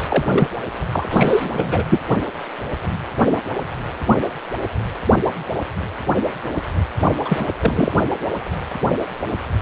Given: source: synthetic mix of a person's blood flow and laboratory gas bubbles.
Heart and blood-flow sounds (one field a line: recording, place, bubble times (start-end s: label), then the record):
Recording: Doppler ultrasound of blood flow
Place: precordium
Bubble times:
0.08-0.26 s: bubbles
0.28-0.48 s: bubbles
0.92-1.83 s: bubbles
1.90-1.99 s: bubbles
7.25-7.46 s: bubbles
7.60-7.92 s: bubbles
From the record:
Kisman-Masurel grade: 223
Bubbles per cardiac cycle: several, 3 to 8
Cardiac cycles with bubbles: 10 to 50%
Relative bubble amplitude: loud (0.450 to 0.775)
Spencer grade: 2 (many but less than half of the cardiac periods contain bubble signals, singularly or in groups)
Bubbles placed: anywhere in the cardiac cycle